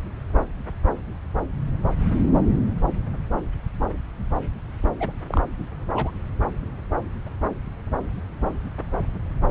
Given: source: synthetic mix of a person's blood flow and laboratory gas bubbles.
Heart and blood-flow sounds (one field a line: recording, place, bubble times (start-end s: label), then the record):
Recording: Doppler ultrasound of blood flow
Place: subclavian vein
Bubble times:
5.00-5.12 s: bubbles
5.28-5.41 s: bubbles
5.95-6.10 s: bubbles
From the record:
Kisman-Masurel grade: 122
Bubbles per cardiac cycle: 1 to 2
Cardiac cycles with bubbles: 10 to 50%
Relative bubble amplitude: moderate (0.250 to 0.450)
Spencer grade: 2 (many but less than half of the cardiac periods contain bubble signals, singularly or in groups)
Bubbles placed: anywhere in the cardiac cycle